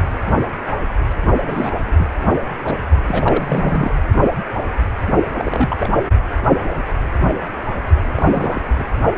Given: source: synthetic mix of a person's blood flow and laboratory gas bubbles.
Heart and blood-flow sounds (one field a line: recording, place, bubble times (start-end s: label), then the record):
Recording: Doppler ultrasound of blood flow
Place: precordium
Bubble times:
1.46-1.74 s: bubbles
1.99-2.07 s: bubbles
2.63-2.77 s: bubbles
3.08-3.92 s: bubbles
5.38-5.75 s: bubbles
5.78-5.91 s: bubbles
8.12-8.62 s: bubbles
8.76-8.85 s: bubbles
From the record:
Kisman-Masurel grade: 222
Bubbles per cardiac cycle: several, 3 to 8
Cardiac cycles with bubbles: 10 to 50%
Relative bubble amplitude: moderate (0.250 to 0.450)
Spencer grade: 2 (many but less than half of the cardiac periods contain bubble signals, singularly or in groups)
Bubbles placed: only in the low amplitude regions of the cardiac cycle